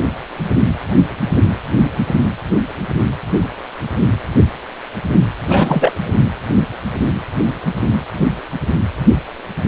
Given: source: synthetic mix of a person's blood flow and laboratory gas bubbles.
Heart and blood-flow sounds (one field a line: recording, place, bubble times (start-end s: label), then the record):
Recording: Doppler ultrasound of blood flow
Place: precordium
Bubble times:
5.48-5.98 s: bubbles
From the record:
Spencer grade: 1 (occasional bubble signal discernible with the cardiac motion signal, with majority of cardiac periods free of bubbles)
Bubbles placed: anywhere in the cardiac cycle